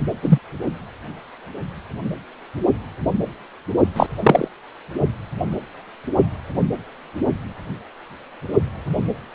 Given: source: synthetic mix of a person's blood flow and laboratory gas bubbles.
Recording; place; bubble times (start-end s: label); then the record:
Doppler ultrasound of blood flow; precordium
0.22-0.39 s: bubbles
3.96-4.07 s: bubbles
4.23-4.48 s: bubbles
From the record:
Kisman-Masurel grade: 123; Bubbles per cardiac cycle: 1 to 2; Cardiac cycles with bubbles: 10 to 50%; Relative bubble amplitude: loud (0.450 to 0.775); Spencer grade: 2 (many but less than half of the cardiac periods contain bubble signals, singularly or in groups); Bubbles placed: only in the low amplitude regions of the cardiac cycle